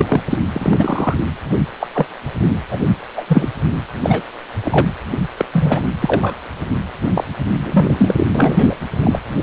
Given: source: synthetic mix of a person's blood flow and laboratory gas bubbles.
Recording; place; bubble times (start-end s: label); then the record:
Doppler ultrasound of blood flow; precordium
0.00-0.05 s: bubbles
0.08-0.21 s: bubbles
0.29-0.36 s: bubbles
0.52-1.15 s: bubbles
1.79-1.87 s: bubbles
1.95-2.06 s: bubbles
2.70-2.78 s: bubbles
3.17-3.24 s: bubbles
3.27-3.49 s: bubbles
4.02-4.22 s: bubbles
4.63-4.93 s: bubbles
5.37-5.45 s: bubbles
5.52-5.90 s: bubbles
6.02-6.34 s: bubbles
7.15-7.24 s: bubbles
7.62-8.26 s: bubbles
8.35-8.76 s: bubbles
9.02-9.20 s: bubbles
From the record:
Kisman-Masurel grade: 243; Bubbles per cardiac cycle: several, 3 to 8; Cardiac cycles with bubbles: 100%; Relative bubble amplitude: loud (0.450 to 0.775); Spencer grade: 3 (all of the cardiac periods contain showers or single bubble signals, but not dominating or overriding the cardiac motion signals); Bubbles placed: anywhere in the cardiac cycle